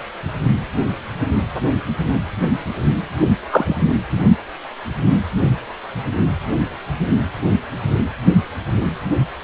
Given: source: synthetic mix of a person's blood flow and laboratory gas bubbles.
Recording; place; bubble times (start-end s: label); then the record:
Doppler ultrasound of blood flow; precordium
3.50-3.88 s: bubbles
From the record:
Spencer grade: 1 (occasional bubble signal discernible with the cardiac motion signal, with majority of cardiac periods free of bubbles); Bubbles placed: only in the low amplitude regions of the cardiac cycle